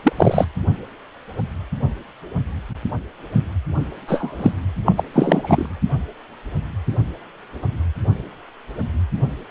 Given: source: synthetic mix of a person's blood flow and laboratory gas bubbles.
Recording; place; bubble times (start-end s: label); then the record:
Doppler ultrasound of blood flow; precordium
0.00-0.12 s: bubbles
0.17-0.46 s: bubbles
4.08-4.52 s: bubbles
4.85-4.93 s: bubbles
4.97-5.04 s: bubbles
5.13-5.69 s: bubbles
From the record:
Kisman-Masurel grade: 223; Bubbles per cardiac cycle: several, 3 to 8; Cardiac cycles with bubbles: 10 to 50%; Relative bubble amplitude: loud (0.450 to 0.775); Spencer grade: 2 (many but less than half of the cardiac periods contain bubble signals, singularly or in groups); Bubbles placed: anywhere in the cardiac cycle